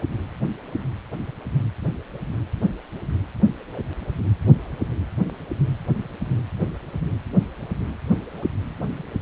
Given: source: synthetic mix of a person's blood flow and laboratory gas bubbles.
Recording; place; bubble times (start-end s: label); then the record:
Doppler ultrasound of blood flow; precordium
no bubbles
From the record:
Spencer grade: 0 (complete lack of bubble signals)